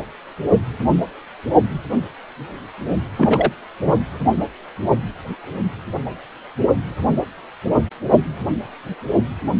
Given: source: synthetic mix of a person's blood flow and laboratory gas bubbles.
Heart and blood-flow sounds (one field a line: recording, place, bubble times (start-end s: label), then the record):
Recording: Doppler ultrasound of blood flow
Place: precordium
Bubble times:
3.17-3.52 s: bubbles
3.83-3.95 s: bubbles
From the record:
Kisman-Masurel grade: 213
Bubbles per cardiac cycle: several, 3 to 8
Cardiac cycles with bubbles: 1 to 10%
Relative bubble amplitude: loud (0.450 to 0.775)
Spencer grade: 1 (occasional bubble signal discernible with the cardiac motion signal, with majority of cardiac periods free of bubbles)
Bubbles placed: anywhere in the cardiac cycle